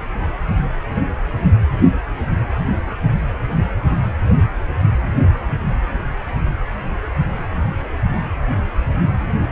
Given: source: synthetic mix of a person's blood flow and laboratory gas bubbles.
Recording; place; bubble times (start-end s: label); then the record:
Doppler ultrasound of blood flow; precordium
no bubbles
From the record:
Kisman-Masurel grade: 000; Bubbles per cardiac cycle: 0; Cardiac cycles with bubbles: 0%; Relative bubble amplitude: no bubbles discernible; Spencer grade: 0 (complete lack of bubble signals)